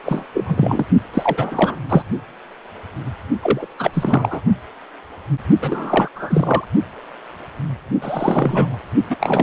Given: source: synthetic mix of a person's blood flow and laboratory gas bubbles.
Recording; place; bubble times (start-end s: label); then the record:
Doppler ultrasound of blood flow; precordium
0.05-0.24 s: bubbles
0.34-0.86 s: bubbles
1.14-1.78 s: bubbles
1.90-2.03 s: bubbles
3.42-3.67 s: bubbles
3.78-3.91 s: bubbles
3.93-4.42 s: bubbles
5.61-6.08 s: bubbles
6.15-6.67 s: bubbles
8.01-8.79 s: bubbles
9.10-9.17 s: bubbles
9.20-9.43 s: bubbles
From the record:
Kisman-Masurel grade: 333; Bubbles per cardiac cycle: rolling drumbeat, 9 or more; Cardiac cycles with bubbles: 50 to 99%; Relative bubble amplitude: loud (0.450 to 0.775); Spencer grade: 3 (all of the cardiac periods contain showers or single bubble signals, but not dominating or overriding the cardiac motion signals); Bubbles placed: only in the low amplitude regions of the cardiac cycle